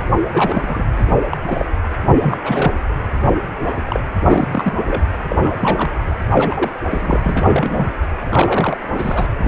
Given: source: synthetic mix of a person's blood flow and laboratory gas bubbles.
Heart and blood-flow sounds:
Doppler ultrasound of blood flow; precordium
0.32-0.84 s: bubbles
1.31-1.38 s: bubbles
1.50-1.66 s: bubbles
2.16-2.38 s: bubbles
2.42-2.73 s: bubbles
3.24-3.28 s: bubbles
3.54-3.73 s: bubbles
3.85-4.00 s: bubbles
4.25-4.47 s: bubbles
4.51-4.73 s: bubbles
4.85-5.01 s: bubbles
5.29-5.35 s: bubbles
5.38-5.55 s: bubbles
5.59-5.98 s: bubbles
6.29-6.71 s: bubbles
6.90-7.19 s: bubbles
7.23-7.91 s: bubbles
8.30-8.78 s: bubbles
8.94-9.27 s: bubbles
9.40-9.48 s: bubbles
From the record:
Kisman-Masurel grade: 242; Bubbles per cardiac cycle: several, 3 to 8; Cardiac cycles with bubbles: 100%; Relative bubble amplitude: moderate (0.250 to 0.450); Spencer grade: 3 (all of the cardiac periods contain showers or single bubble signals, but not dominating or overriding the cardiac motion signals); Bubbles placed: anywhere in the cardiac cycle

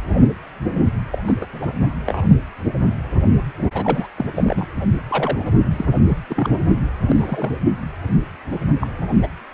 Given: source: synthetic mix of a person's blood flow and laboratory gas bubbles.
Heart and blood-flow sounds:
Doppler ultrasound of blood flow; precordium
1.11-1.19 s: bubbles
1.26-1.36 s: bubbles
1.41-1.46 s: bubbles
1.52-1.73 s: bubbles
2.06-2.22 s: bubbles
3.73-4.08 s: bubbles
4.16-4.26 s: bubbles
4.36-4.66 s: bubbles
5.08-5.39 s: bubbles
5.46-5.51 s: bubbles
5.71-5.85 s: bubbles
6.08-6.17 s: bubbles
6.29-6.50 s: bubbles
7.09-7.50 s: bubbles
8.80-8.87 s: bubbles
9.22-9.27 s: bubbles
From the record:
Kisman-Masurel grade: 232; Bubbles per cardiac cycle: several, 3 to 8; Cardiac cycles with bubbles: 50 to 99%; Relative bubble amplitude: moderate (0.250 to 0.450); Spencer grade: 3 (all of the cardiac periods contain showers or single bubble signals, but not dominating or overriding the cardiac motion signals); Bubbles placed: only in the low amplitude regions of the cardiac cycle

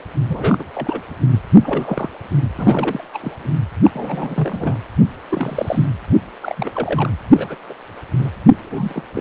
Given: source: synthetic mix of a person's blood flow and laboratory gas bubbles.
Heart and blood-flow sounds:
Doppler ultrasound of blood flow; precordium
0.29-0.64 s: bubbles
0.74-1.02 s: bubbles
1.59-2.08 s: bubbles
2.58-3.07 s: bubbles
3.13-3.19 s: bubbles
3.22-3.50 s: bubbles
3.82-3.90 s: bubbles
3.94-4.81 s: bubbles
5.29-5.86 s: bubbles
6.07-6.17 s: bubbles
6.42-7.10 s: bubbles
7.38-7.55 s: bubbles
7.69-7.74 s: bubbles
8.18-8.29 s: bubbles
8.49-9.02 s: bubbles
9.15-9.21 s: bubbles
From the record:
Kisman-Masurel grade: 242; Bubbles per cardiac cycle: several, 3 to 8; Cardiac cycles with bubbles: 100%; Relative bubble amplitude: moderate (0.250 to 0.450); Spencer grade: 3 (all of the cardiac periods contain showers or single bubble signals, but not dominating or overriding the cardiac motion signals); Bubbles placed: anywhere in the cardiac cycle

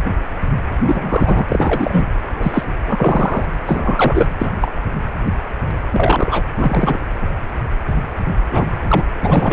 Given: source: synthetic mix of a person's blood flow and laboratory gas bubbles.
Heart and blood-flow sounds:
Doppler ultrasound of blood flow; precordium
0.82-2.06 s: bubbles
2.35-2.64 s: bubbles
2.85-3.46 s: bubbles
3.65-4.27 s: bubbles
4.39-4.53 s: bubbles
4.61-4.74 s: bubbles
5.92-6.43 s: bubbles
6.56-6.99 s: bubbles
8.51-8.66 s: bubbles
8.89-9.04 s: bubbles
9.20-9.53 s: bubbles
From the record:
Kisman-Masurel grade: 233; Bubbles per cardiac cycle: several, 3 to 8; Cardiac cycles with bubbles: 50 to 99%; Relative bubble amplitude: loud (0.450 to 0.775); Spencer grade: 3 (all of the cardiac periods contain showers or single bubble signals, but not dominating or overriding the cardiac motion signals); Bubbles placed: anywhere in the cardiac cycle

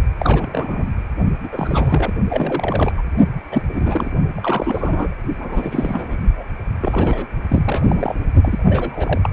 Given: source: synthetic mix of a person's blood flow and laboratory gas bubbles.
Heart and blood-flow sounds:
Doppler ultrasound of blood flow; precordium
0.18-0.88 s: bubbles
1.44-1.48 s: bubbles
1.52-2.14 s: bubbles
2.29-2.92 s: bubbles
2.98-3.02 s: bubbles
3.52-3.63 s: bubbles
3.72-4.12 s: bubbles
4.36-5.14 s: bubbles
5.38-6.17 s: bubbles
6.35-6.45 s: bubbles
6.80-7.26 s: bubbles
7.48-8.14 s: bubbles
8.42-8.64 s: bubbles
8.67-9.20 s: bubbles
9.23-9.33 s: bubbles
From the record:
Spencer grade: 3 (all of the cardiac periods contain showers or single bubble signals, but not dominating or overriding the cardiac motion signals); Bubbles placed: only in the low amplitude regions of the cardiac cycle

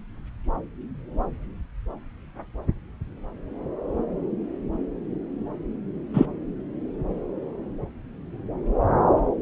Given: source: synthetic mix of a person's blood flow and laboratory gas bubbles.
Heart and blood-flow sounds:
Doppler ultrasound of blood flow; subclavian vein
6.14-6.25 s: bubbles
From the record:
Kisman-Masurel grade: 123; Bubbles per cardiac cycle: 1 to 2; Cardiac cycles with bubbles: 10 to 50%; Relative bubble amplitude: loud (0.450 to 0.775); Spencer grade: 2 (many but less than half of the cardiac periods contain bubble signals, singularly or in groups); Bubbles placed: anywhere in the cardiac cycle

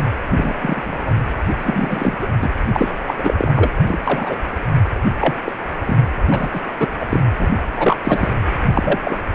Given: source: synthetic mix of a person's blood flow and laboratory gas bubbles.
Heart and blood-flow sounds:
Doppler ultrasound of blood flow; precordium
0.36-0.56 s: bubbles
0.59-1.13 s: bubbles
1.52-2.18 s: bubbles
2.21-2.27 s: bubbles
2.42-2.50 s: bubbles
2.73-3.00 s: bubbles
3.06-3.15 s: bubbles
3.17-3.34 s: bubbles
3.39-3.70 s: bubbles
3.86-4.01 s: bubbles
4.04-4.37 s: bubbles
5.21-5.34 s: bubbles
5.46-5.53 s: bubbles
5.84-5.98 s: bubbles
6.30-6.61 s: bubbles
6.79-6.88 s: bubbles
7.00-7.06 s: bubbles
7.09-7.20 s: bubbles
7.39-7.51 s: bubbles
7.76-7.96 s: bubbles
8.04-8.34 s: bubbles
8.73-8.99 s: bubbles
9.04-9.27 s: bubbles
From the record:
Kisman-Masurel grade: 243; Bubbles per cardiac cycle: several, 3 to 8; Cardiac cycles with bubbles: 100%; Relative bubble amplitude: loud (0.450 to 0.775); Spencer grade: 3 (all of the cardiac periods contain showers or single bubble signals, but not dominating or overriding the cardiac motion signals); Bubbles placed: anywhere in the cardiac cycle

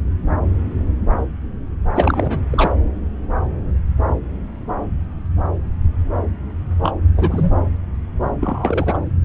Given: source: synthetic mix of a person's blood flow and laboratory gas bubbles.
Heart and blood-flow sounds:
Doppler ultrasound of blood flow; subclavian vein
1.95-2.42 s: bubbles
2.50-2.72 s: bubbles
6.82-6.92 s: bubbles
7.17-7.52 s: bubbles
8.40-8.97 s: bubbles
From the record:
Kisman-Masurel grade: 222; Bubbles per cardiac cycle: several, 3 to 8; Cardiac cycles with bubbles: 10 to 50%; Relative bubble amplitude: moderate (0.250 to 0.450); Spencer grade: 2 (many but less than half of the cardiac periods contain bubble signals, singularly or in groups); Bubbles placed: anywhere in the cardiac cycle

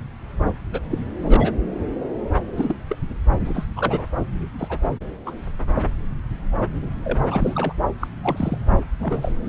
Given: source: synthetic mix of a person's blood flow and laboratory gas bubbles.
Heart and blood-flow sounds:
Doppler ultrasound of blood flow; subclavian vein
0.72-0.80 s: bubbles
0.91-0.98 s: bubbles
1.20-1.54 s: bubbles
2.57-2.76 s: bubbles
2.89-2.96 s: bubbles
3.45-3.66 s: bubbles
3.76-4.05 s: bubbles
4.58-4.78 s: bubbles
5.25-5.31 s: bubbles
5.75-5.82 s: bubbles
7.04-7.19 s: bubbles
7.26-7.74 s: bubbles
8.00-8.08 s: bubbles
8.21-8.58 s: bubbles
8.83-8.85 s: bubbles
9.02-9.34 s: bubbles
From the record:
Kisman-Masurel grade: 232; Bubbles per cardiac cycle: several, 3 to 8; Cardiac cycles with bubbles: 50 to 99%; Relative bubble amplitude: moderate (0.250 to 0.450); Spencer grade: 3 (all of the cardiac periods contain showers or single bubble signals, but not dominating or overriding the cardiac motion signals); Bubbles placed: anywhere in the cardiac cycle

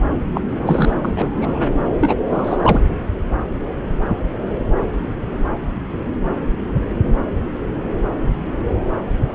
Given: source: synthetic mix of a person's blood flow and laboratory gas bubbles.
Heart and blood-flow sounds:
Doppler ultrasound of blood flow; subclavian vein
0.34-0.41 s: bubbles
0.49-0.93 s: bubbles
1.02-1.70 s: bubbles
2.00-2.15 s: bubbles
2.31-2.83 s: bubbles
From the record:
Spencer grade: 2 (many but less than half of the cardiac periods contain bubble signals, singularly or in groups); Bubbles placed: anywhere in the cardiac cycle

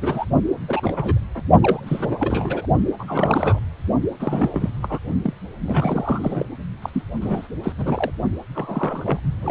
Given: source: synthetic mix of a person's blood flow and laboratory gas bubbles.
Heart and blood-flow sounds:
Doppler ultrasound of blood flow; precordium
0.00-0.25 s: bubbles
0.68-1.19 s: bubbles
1.34-1.42 s: bubbles
1.60-2.66 s: bubbles
2.99-3.59 s: bubbles
4.20-4.70 s: bubbles
4.82-4.99 s: bubbles
5.22-5.33 s: bubbles
5.67-6.46 s: bubbles
6.82-6.90 s: bubbles
6.93-7.03 s: bubbles
7.21-7.48 s: bubbles
7.63-7.72 s: bubbles
7.78-8.11 s: bubbles
8.54-9.19 s: bubbles
9.42-9.51 s: bubbles
From the record:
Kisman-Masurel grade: 342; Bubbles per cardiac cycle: rolling drumbeat, 9 or more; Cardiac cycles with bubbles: 100%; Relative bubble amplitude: moderate (0.250 to 0.450); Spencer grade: 3 (all of the cardiac periods contain showers or single bubble signals, but not dominating or overriding the cardiac motion signals); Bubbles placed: only in the low amplitude regions of the cardiac cycle

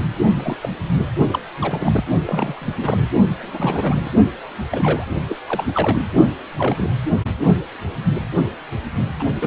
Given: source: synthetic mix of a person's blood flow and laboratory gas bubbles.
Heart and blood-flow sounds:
Doppler ultrasound of blood flow; precordium
0.36-0.57 s: bubbles
0.62-0.69 s: bubbles
0.98-1.08 s: bubbles
1.30-1.40 s: bubbles
1.61-2.04 s: bubbles
2.27-3.08 s: bubbles
3.33-4.09 s: bubbles
4.71-5.04 s: bubbles
5.29-5.38 s: bubbles
5.46-6.02 s: bubbles
6.58-6.91 s: bubbles
9.20-9.25 s: bubbles
9.41-9.47 s: bubbles
From the record:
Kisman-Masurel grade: 232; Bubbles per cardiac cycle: several, 3 to 8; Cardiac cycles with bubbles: 50 to 99%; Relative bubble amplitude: moderate (0.250 to 0.450); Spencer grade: 3 (all of the cardiac periods contain showers or single bubble signals, but not dominating or overriding the cardiac motion signals); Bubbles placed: only in the low amplitude regions of the cardiac cycle

